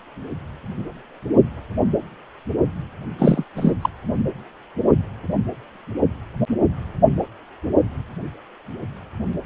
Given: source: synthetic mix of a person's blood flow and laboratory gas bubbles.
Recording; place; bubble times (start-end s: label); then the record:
Doppler ultrasound of blood flow; precordium
3.19-3.44 s: bubbles
3.56-3.72 s: bubbles
3.82-3.90 s: bubbles
From the record:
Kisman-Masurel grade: 223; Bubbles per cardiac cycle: several, 3 to 8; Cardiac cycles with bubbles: 10 to 50%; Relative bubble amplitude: loud (0.450 to 0.775); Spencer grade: 2 (many but less than half of the cardiac periods contain bubble signals, singularly or in groups); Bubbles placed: anywhere in the cardiac cycle